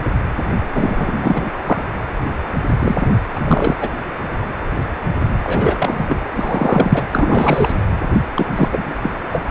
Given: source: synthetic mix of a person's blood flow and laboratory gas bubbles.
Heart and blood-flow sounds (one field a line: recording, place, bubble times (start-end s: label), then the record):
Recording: Doppler ultrasound of blood flow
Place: precordium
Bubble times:
0.74-1.58 s: bubbles
1.67-1.82 s: bubbles
2.79-3.07 s: bubbles
3.35-3.40 s: bubbles
3.44-3.76 s: bubbles
3.80-3.90 s: bubbles
5.43-6.06 s: bubbles
6.08-6.26 s: bubbles
6.34-7.05 s: bubbles
7.12-7.73 s: bubbles
8.34-8.46 s: bubbles
8.55-8.69 s: bubbles
8.71-8.95 s: bubbles
9.02-9.10 s: bubbles
9.29-9.41 s: bubbles
From the record:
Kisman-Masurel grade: 333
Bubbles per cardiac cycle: rolling drumbeat, 9 or more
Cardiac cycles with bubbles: 50 to 99%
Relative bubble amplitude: loud (0.450 to 0.775)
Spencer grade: 3 (all of the cardiac periods contain showers or single bubble signals, but not dominating or overriding the cardiac motion signals)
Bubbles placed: anywhere in the cardiac cycle